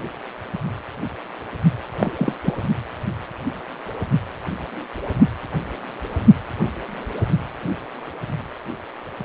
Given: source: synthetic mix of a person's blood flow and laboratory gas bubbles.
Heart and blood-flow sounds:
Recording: Doppler ultrasound of blood flow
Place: precordium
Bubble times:
1.92-2.35 s: bubbles
2.46-2.52 s: bubbles
From the record:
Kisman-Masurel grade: 212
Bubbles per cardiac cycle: several, 3 to 8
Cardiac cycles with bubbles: 1 to 10%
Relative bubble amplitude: moderate (0.250 to 0.450)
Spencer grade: 1 (occasional bubble signal discernible with the cardiac motion signal, with majority of cardiac periods free of bubbles)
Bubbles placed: only in the low amplitude regions of the cardiac cycle

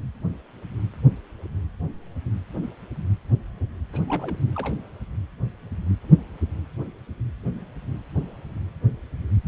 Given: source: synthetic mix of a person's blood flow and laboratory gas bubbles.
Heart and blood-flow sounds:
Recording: Doppler ultrasound of blood flow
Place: precordium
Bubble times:
3.93-4.02 s: bubbles
4.08-4.39 s: bubbles
4.55-4.73 s: bubbles
From the record:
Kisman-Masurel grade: 211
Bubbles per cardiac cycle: several, 3 to 8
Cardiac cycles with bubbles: 1 to 10%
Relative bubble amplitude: barely perceptible (0.100 to 0.250)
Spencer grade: 1 (occasional bubble signal discernible with the cardiac motion signal, with majority of cardiac periods free of bubbles)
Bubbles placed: anywhere in the cardiac cycle

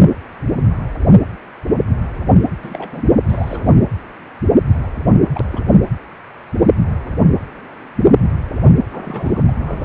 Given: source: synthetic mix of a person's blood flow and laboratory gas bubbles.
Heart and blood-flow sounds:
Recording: Doppler ultrasound of blood flow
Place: precordium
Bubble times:
2.62-3.03 s: bubbles
3.28-3.77 s: bubbles
5.35-5.45 s: bubbles
5.51-5.60 s: bubbles
8.91-9.43 s: bubbles
9.47-9.52 s: bubbles
9.62-9.85 s: bubbles
From the record:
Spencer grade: 2 (many but less than half of the cardiac periods contain bubble signals, singularly or in groups)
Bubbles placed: anywhere in the cardiac cycle

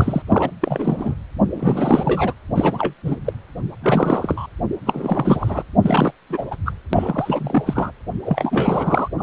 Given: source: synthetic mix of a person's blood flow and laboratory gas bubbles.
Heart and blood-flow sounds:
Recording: Doppler ultrasound of blood flow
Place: precordium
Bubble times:
0.00-0.22 s: bubbles
0.28-0.51 s: bubbles
0.61-1.16 s: bubbles
1.53-2.33 s: bubbles
2.55-2.93 s: bubbles
3.05-3.16 s: bubbles
3.25-3.33 s: bubbles
3.82-4.46 s: bubbles
4.86-5.63 s: bubbles
5.82-6.12 s: bubbles
6.29-6.46 s: bubbles
6.51-6.56 s: bubbles
6.66-6.73 s: bubbles
6.93-7.92 s: bubbles
8.24-9.08 s: bubbles
9.17-9.23 s: bubbles
From the record:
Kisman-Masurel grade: 342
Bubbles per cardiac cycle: rolling drumbeat, 9 or more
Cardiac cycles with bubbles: 100%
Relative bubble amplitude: moderate (0.250 to 0.450)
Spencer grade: 3 (all of the cardiac periods contain showers or single bubble signals, but not dominating or overriding the cardiac motion signals)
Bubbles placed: anywhere in the cardiac cycle

